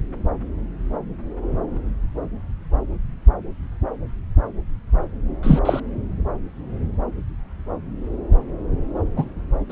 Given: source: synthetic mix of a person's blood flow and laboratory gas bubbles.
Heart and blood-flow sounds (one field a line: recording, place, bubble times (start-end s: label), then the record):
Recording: Doppler ultrasound of blood flow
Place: subclavian vein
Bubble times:
5.42-5.59 s: bubbles
5.65-5.80 s: bubbles
9.15-9.25 s: bubbles
9.69-9.72 s: bubbles
From the record:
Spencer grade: 2 (many but less than half of the cardiac periods contain bubble signals, singularly or in groups)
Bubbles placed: anywhere in the cardiac cycle